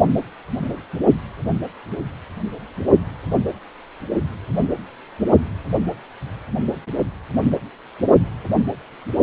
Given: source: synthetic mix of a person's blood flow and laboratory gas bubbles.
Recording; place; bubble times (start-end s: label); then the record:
Doppler ultrasound of blood flow; precordium
no bubbles
From the record:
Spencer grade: 0 (complete lack of bubble signals)